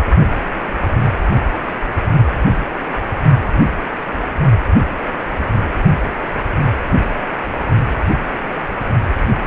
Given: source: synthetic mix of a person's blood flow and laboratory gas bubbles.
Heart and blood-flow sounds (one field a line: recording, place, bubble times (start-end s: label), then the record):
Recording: Doppler ultrasound of blood flow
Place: precordium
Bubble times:
1.49-1.55 s: bubbles
From the record:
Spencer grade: 1 (occasional bubble signal discernible with the cardiac motion signal, with majority of cardiac periods free of bubbles)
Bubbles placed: only in the low amplitude regions of the cardiac cycle